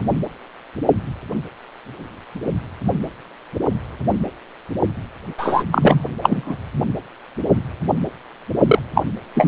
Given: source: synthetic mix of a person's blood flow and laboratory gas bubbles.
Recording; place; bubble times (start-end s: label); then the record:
Doppler ultrasound of blood flow; precordium
5.38-5.63 s: bubbles
5.71-6.06 s: bubbles
6.21-6.56 s: bubbles
8.66-8.79 s: bubbles
8.95-9.04 s: bubbles
9.35-9.48 s: bubbles
From the record:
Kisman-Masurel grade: 223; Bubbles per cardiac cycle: several, 3 to 8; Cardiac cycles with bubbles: 10 to 50%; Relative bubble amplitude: loud (0.450 to 0.775); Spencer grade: 2 (many but less than half of the cardiac periods contain bubble signals, singularly or in groups); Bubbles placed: only in the low amplitude regions of the cardiac cycle